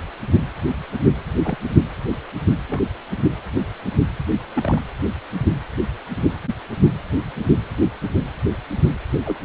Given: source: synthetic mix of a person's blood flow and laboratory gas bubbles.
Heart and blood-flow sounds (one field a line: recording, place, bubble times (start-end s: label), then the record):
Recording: Doppler ultrasound of blood flow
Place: precordium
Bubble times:
1.44-1.57 s: bubbles
2.67-2.81 s: bubbles
4.56-4.82 s: bubbles
9.25-9.36 s: bubbles
From the record:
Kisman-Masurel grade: 121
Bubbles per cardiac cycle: 1 to 2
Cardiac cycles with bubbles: 10 to 50%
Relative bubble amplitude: barely perceptible (0.100 to 0.250)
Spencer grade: 2 (many but less than half of the cardiac periods contain bubble signals, singularly or in groups)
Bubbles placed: anywhere in the cardiac cycle